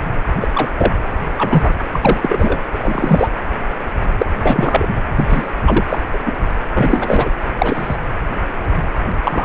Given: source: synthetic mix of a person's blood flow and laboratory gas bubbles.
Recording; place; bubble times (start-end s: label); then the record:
Doppler ultrasound of blood flow; precordium
0.41-0.48 s: bubbles
0.53-0.70 s: bubbles
0.78-0.92 s: bubbles
1.37-1.75 s: bubbles
1.92-2.60 s: bubbles
2.71-3.29 s: bubbles
4.18-4.26 s: bubbles
4.43-4.92 s: bubbles
5.16-5.51 s: bubbles
5.62-5.85 s: bubbles
5.90-6.02 s: bubbles
6.12-6.19 s: bubbles
6.25-6.32 s: bubbles
6.74-7.30 s: bubbles
7.58-7.96 s: bubbles
9.24-9.45 s: bubbles
From the record:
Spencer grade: 3 (all of the cardiac periods contain showers or single bubble signals, but not dominating or overriding the cardiac motion signals); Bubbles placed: anywhere in the cardiac cycle